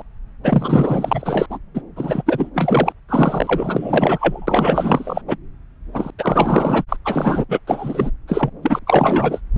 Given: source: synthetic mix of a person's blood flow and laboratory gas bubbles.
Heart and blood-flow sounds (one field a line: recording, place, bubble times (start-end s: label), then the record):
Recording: Doppler ultrasound of blood flow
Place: subclavian vein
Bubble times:
0.00-0.02 s: bubbles
0.43-1.46 s: bubbles
1.49-1.59 s: bubbles
1.74-1.82 s: bubbles
1.96-2.22 s: bubbles
2.26-2.50 s: bubbles
2.54-2.92 s: bubbles
3.08-5.21 s: bubbles
5.28-5.37 s: bubbles
5.94-6.11 s: bubbles
6.18-6.83 s: bubbles
6.88-6.96 s: bubbles
7.04-7.45 s: bubbles
7.49-7.60 s: bubbles
7.67-8.11 s: bubbles
8.28-8.50 s: bubbles
8.62-8.79 s: bubbles
8.87-9.40 s: bubbles
From the record:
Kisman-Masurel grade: 444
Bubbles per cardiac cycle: continuous sound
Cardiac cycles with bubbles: 100%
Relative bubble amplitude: maximal (0.775 to 0.999)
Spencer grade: 4 (maximum detectable bubble signal sounding continuously throughout systole and diastole of every cardiac period, and overriding the amplitude of the normal cardiac signals)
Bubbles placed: anywhere in the cardiac cycle